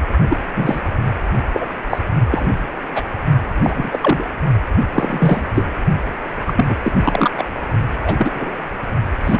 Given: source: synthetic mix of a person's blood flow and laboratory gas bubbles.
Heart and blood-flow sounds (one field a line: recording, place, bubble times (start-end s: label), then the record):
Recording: Doppler ultrasound of blood flow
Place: precordium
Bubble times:
0.29-0.37 s: bubbles
0.56-0.81 s: bubbles
1.53-1.67 s: bubbles
1.90-1.99 s: bubbles
2.31-2.50 s: bubbles
2.95-3.01 s: bubbles
3.63-3.90 s: bubbles
3.92-3.98 s: bubbles
4.01-4.24 s: bubbles
4.92-5.43 s: bubbles
5.54-5.64 s: bubbles
6.46-6.66 s: bubbles
6.69-6.76 s: bubbles
6.83-6.92 s: bubbles
6.95-7.31 s: bubbles
7.37-7.44 s: bubbles
8.03-8.55 s: bubbles
9.24-9.40 s: bubbles
From the record:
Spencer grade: 3 (all of the cardiac periods contain showers or single bubble signals, but not dominating or overriding the cardiac motion signals)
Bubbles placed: only in the low amplitude regions of the cardiac cycle